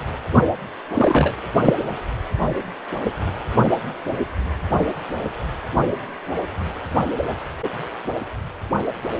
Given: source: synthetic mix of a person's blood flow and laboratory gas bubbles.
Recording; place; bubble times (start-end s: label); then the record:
Doppler ultrasound of blood flow; precordium
0.95-1.32 s: bubbles
1.66-1.74 s: bubbles
From the record:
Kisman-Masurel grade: 123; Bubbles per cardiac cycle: 1 to 2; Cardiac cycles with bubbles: 10 to 50%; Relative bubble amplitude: loud (0.450 to 0.775); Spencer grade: 2 (many but less than half of the cardiac periods contain bubble signals, singularly or in groups); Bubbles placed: anywhere in the cardiac cycle